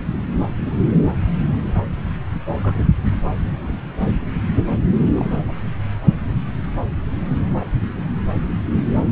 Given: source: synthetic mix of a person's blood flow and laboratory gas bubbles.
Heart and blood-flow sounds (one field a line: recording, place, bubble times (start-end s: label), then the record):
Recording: Doppler ultrasound of blood flow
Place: subclavian vein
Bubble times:
2.54-2.83 s: bubbles
5.17-5.26 s: bubbles
5.48-5.53 s: bubbles
7.58-7.71 s: bubbles
From the record:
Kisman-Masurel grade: 121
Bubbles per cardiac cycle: 1 to 2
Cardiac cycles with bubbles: 10 to 50%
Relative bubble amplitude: barely perceptible (0.100 to 0.250)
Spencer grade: 2 (many but less than half of the cardiac periods contain bubble signals, singularly or in groups)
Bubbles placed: anywhere in the cardiac cycle